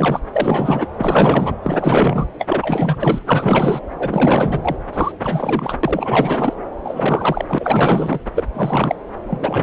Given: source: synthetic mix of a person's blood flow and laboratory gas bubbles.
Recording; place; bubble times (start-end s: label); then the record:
Doppler ultrasound of blood flow; subclavian vein
0.00-0.21 s: bubbles
0.34-0.86 s: bubbles
0.96-1.55 s: bubbles
1.62-2.27 s: bubbles
2.38-3.23 s: bubbles
3.25-3.80 s: bubbles
3.99-4.76 s: bubbles
4.92-5.12 s: bubbles
5.21-5.79 s: bubbles
5.83-6.55 s: bubbles
6.84-8.20 s: bubbles
8.36-8.44 s: bubbles
8.54-8.96 s: bubbles
9.27-9.63 s: bubbles
From the record:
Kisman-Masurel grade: 444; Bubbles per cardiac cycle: continuous sound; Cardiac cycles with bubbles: 100%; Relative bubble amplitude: maximal (0.775 to 0.999); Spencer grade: 4 (maximum detectable bubble signal sounding continuously throughout systole and diastole of every cardiac period, and overriding the amplitude of the normal cardiac signals); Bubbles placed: anywhere in the cardiac cycle